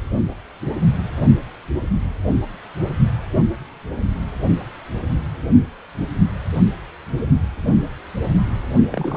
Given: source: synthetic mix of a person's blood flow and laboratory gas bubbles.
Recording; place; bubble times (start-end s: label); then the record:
Doppler ultrasound of blood flow; precordium
8.91-9.17 s: bubbles
From the record:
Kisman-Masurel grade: 211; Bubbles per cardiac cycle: several, 3 to 8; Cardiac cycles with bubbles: 1 to 10%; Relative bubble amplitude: barely perceptible (0.100 to 0.250); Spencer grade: 1 (occasional bubble signal discernible with the cardiac motion signal, with majority of cardiac periods free of bubbles); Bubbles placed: only in the low amplitude regions of the cardiac cycle